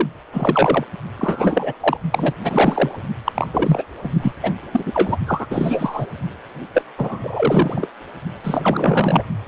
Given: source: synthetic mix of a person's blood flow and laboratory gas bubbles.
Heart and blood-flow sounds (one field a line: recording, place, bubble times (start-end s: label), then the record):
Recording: Doppler ultrasound of blood flow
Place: precordium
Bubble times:
0.00-0.08 s: bubbles
0.32-0.84 s: bubbles
1.19-1.73 s: bubbles
1.80-1.97 s: bubbles
2.12-2.33 s: bubbles
2.41-3.00 s: bubbles
3.25-3.32 s: bubbles
3.34-3.48 s: bubbles
3.53-3.83 s: bubbles
4.04-4.10 s: bubbles
4.22-4.33 s: bubbles
4.43-4.51 s: bubbles
4.73-5.17 s: bubbles
5.27-5.47 s: bubbles
5.51-6.07 s: bubbles
6.75-6.83 s: bubbles
6.98-7.87 s: bubbles
8.44-9.23 s: bubbles
9.46-9.48 s: bubbles
From the record:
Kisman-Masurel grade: 342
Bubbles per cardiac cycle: rolling drumbeat, 9 or more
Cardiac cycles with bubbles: 100%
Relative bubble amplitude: moderate (0.250 to 0.450)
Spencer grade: 3 (all of the cardiac periods contain showers or single bubble signals, but not dominating or overriding the cardiac motion signals)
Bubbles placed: only in the low amplitude regions of the cardiac cycle